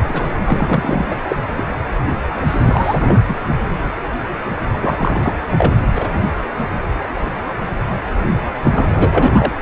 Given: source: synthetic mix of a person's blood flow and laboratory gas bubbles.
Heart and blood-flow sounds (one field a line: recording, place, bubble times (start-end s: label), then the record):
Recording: Doppler ultrasound of blood flow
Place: precordium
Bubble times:
0.08-0.34 s: bubbles
0.45-1.24 s: bubbles
1.28-1.36 s: bubbles
1.56-1.64 s: bubbles
2.46-3.21 s: bubbles
3.27-3.36 s: bubbles
4.80-5.36 s: bubbles
5.51-5.72 s: bubbles
5.95-6.08 s: bubbles
8.63-9.52 s: bubbles
From the record:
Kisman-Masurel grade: 333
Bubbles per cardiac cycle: rolling drumbeat, 9 or more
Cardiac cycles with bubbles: 50 to 99%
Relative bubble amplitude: loud (0.450 to 0.775)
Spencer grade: 3 (all of the cardiac periods contain showers or single bubble signals, but not dominating or overriding the cardiac motion signals)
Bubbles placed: anywhere in the cardiac cycle